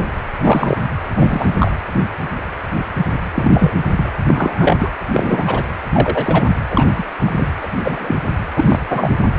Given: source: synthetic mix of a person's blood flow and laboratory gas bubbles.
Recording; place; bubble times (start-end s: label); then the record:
Doppler ultrasound of blood flow; precordium
0.00-0.04 s: bubbles
0.38-0.77 s: bubbles
1.17-1.55 s: bubbles
1.59-1.73 s: bubbles
3.34-3.74 s: bubbles
3.97-4.11 s: bubbles
4.27-4.90 s: bubbles
5.12-5.62 s: bubbles
5.93-6.46 s: bubbles
6.70-7.04 s: bubbles
7.25-7.50 s: bubbles
7.61-7.69 s: bubbles
7.78-8.17 s: bubbles
8.56-8.79 s: bubbles
8.89-9.13 s: bubbles
From the record:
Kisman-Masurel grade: 233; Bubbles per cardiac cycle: several, 3 to 8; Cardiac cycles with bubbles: 50 to 99%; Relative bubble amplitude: loud (0.450 to 0.775); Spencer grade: 3 (all of the cardiac periods contain showers or single bubble signals, but not dominating or overriding the cardiac motion signals); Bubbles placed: anywhere in the cardiac cycle